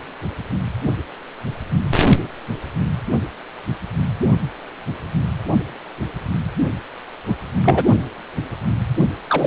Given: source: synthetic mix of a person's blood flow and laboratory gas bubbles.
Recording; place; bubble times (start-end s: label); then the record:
Doppler ultrasound of blood flow; precordium
7.27-7.35 s: bubbles
7.64-7.85 s: bubbles
9.29-9.47 s: bubbles
From the record:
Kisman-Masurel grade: 223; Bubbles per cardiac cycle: several, 3 to 8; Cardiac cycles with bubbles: 10 to 50%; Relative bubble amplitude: loud (0.450 to 0.775); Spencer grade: 2 (many but less than half of the cardiac periods contain bubble signals, singularly or in groups); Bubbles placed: only in the low amplitude regions of the cardiac cycle